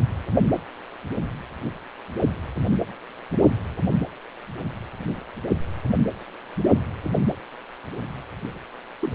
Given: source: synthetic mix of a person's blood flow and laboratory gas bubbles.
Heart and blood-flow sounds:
Doppler ultrasound of blood flow; precordium
9.03-9.12 s: bubbles
From the record:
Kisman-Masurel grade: 121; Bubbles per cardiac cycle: 1 to 2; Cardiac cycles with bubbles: 10 to 50%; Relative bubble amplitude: barely perceptible (0.100 to 0.250); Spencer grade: 2 (many but less than half of the cardiac periods contain bubble signals, singularly or in groups); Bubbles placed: anywhere in the cardiac cycle

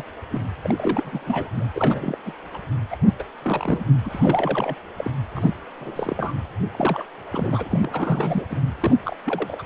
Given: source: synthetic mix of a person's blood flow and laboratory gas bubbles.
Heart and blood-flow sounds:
Doppler ultrasound of blood flow; precordium
0.00-0.04 s: bubbles
0.30-0.39 s: bubbles
0.64-1.50 s: bubbles
1.55-1.65 s: bubbles
1.75-2.17 s: bubbles
2.25-2.33 s: bubbles
2.53-2.57 s: bubbles
2.90-2.96 s: bubbles
3.07-3.12 s: bubbles
3.19-3.24 s: bubbles
3.42-3.84 s: bubbles
4.04-4.75 s: bubbles
4.97-5.11 s: bubbles
5.35-5.53 s: bubbles
5.80-6.34 s: bubbles
6.71-7.04 s: bubbles
7.32-8.46 s: bubbles
8.50-8.61 s: bubbles
8.81-8.96 s: bubbles
9.04-9.16 s: bubbles
9.26-9.62 s: bubbles
From the record:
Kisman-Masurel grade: 342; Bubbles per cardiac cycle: rolling drumbeat, 9 or more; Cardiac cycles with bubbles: 100%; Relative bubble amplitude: moderate (0.250 to 0.450); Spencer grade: 3 (all of the cardiac periods contain showers or single bubble signals, but not dominating or overriding the cardiac motion signals); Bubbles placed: anywhere in the cardiac cycle

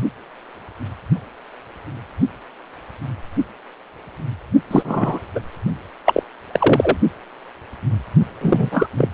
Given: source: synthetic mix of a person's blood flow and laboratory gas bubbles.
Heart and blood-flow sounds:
Doppler ultrasound of blood flow; precordium
4.71-5.19 s: bubbles
5.35-5.40 s: bubbles
6.05-6.23 s: bubbles
6.53-6.96 s: bubbles
8.41-8.89 s: bubbles
8.97-9.08 s: bubbles
From the record:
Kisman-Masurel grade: 223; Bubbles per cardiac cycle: several, 3 to 8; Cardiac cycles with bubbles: 10 to 50%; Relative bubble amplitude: loud (0.450 to 0.775); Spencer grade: 2 (many but less than half of the cardiac periods contain bubble signals, singularly or in groups); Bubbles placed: only in the low amplitude regions of the cardiac cycle

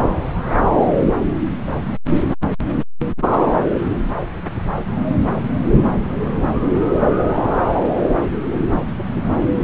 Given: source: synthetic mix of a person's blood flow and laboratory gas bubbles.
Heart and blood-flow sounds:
Doppler ultrasound of blood flow; subclavian vein
8.96-9.05 s: bubbles
9.13-9.23 s: bubbles
From the record:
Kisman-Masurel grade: 121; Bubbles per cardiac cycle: 1 to 2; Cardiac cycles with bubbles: 10 to 50%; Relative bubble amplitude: barely perceptible (0.100 to 0.250); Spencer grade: 2 (many but less than half of the cardiac periods contain bubble signals, singularly or in groups); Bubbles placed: anywhere in the cardiac cycle

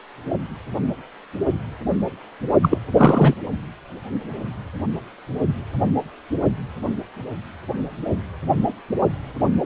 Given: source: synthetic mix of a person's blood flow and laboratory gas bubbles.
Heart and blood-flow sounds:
Doppler ultrasound of blood flow; precordium
2.62-2.78 s: bubbles
2.96-3.34 s: bubbles
From the record:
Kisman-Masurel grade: 213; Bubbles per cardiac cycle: several, 3 to 8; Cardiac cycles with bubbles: 1 to 10%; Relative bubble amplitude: loud (0.450 to 0.775); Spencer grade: 1 (occasional bubble signal discernible with the cardiac motion signal, with majority of cardiac periods free of bubbles); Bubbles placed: only in the low amplitude regions of the cardiac cycle

